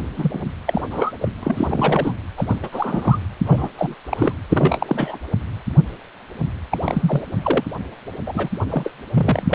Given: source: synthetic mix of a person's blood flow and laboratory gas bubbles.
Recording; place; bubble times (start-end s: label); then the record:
Doppler ultrasound of blood flow; precordium
0.16-0.41 s: bubbles
0.66-0.81 s: bubbles
0.91-1.12 s: bubbles
1.21-1.29 s: bubbles
1.43-2.13 s: bubbles
2.37-2.56 s: bubbles
2.62-2.69 s: bubbles
2.72-3.19 s: bubbles
3.45-3.69 s: bubbles
3.77-3.94 s: bubbles
4.10-4.33 s: bubbles
4.49-5.19 s: bubbles
6.71-6.78 s: bubbles
6.82-7.21 s: bubbles
7.38-7.65 s: bubbles
8.27-8.49 s: bubbles
8.67-8.92 s: bubbles
9.13-9.54 s: bubbles
From the record:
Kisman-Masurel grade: 332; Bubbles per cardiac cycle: rolling drumbeat, 9 or more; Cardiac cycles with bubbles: 50 to 99%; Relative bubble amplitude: moderate (0.250 to 0.450); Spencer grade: 3 (all of the cardiac periods contain showers or single bubble signals, but not dominating or overriding the cardiac motion signals); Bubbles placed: anywhere in the cardiac cycle